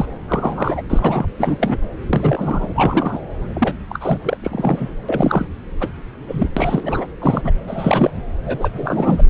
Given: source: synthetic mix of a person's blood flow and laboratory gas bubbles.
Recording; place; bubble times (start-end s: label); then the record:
Doppler ultrasound of blood flow; subclavian vein
0.00-0.05 s: bubbles
0.28-0.82 s: bubbles
0.90-1.27 s: bubbles
1.38-1.78 s: bubbles
2.07-2.69 s: bubbles
2.75-3.21 s: bubbles
3.54-3.75 s: bubbles
3.90-4.20 s: bubbles
4.23-4.37 s: bubbles
4.43-4.95 s: bubbles
5.08-5.47 s: bubbles
5.80-5.88 s: bubbles
6.28-6.48 s: bubbles
6.57-7.07 s: bubbles
7.21-7.42 s: bubbles
7.44-7.52 s: bubbles
7.68-8.11 s: bubbles
8.46-8.69 s: bubbles
8.74-9.25 s: bubbles
From the record:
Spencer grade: 3 (all of the cardiac periods contain showers or single bubble signals, but not dominating or overriding the cardiac motion signals); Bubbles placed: anywhere in the cardiac cycle